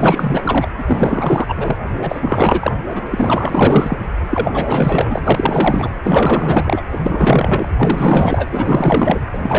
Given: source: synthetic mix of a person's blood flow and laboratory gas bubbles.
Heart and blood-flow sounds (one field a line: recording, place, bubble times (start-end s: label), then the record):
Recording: Doppler ultrasound of blood flow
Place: precordium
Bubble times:
0.00-0.69 s: bubbles
0.77-1.76 s: bubbles
1.98-2.72 s: bubbles
2.89-3.07 s: bubbles
3.11-3.97 s: bubbles
4.30-5.20 s: bubbles
5.24-5.93 s: bubbles
6.04-6.83 s: bubbles
6.92-7.68 s: bubbles
7.78-8.47 s: bubbles
8.51-9.20 s: bubbles
9.32-9.38 s: bubbles
9.43-9.59 s: bubbles
From the record:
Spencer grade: 4 (maximum detectable bubble signal sounding continuously throughout systole and diastole of every cardiac period, and overriding the amplitude of the normal cardiac signals)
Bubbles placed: anywhere in the cardiac cycle